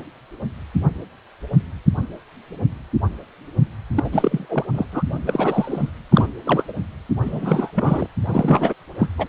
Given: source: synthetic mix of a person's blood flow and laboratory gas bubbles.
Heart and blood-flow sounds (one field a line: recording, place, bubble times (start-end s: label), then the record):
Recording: Doppler ultrasound of blood flow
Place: precordium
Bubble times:
3.95-4.09 s: bubbles
4.12-4.67 s: bubbles
4.74-4.86 s: bubbles
4.92-5.03 s: bubbles
5.25-5.90 s: bubbles
6.09-6.29 s: bubbles
6.46-6.63 s: bubbles
6.67-6.73 s: bubbles
7.22-7.72 s: bubbles
7.75-8.07 s: bubbles
8.25-8.73 s: bubbles
8.99-9.07 s: bubbles
9.18-9.27 s: bubbles
From the record:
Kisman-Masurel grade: 332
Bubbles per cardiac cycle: rolling drumbeat, 9 or more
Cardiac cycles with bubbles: 50 to 99%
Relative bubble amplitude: moderate (0.250 to 0.450)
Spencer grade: 3 (all of the cardiac periods contain showers or single bubble signals, but not dominating or overriding the cardiac motion signals)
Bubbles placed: anywhere in the cardiac cycle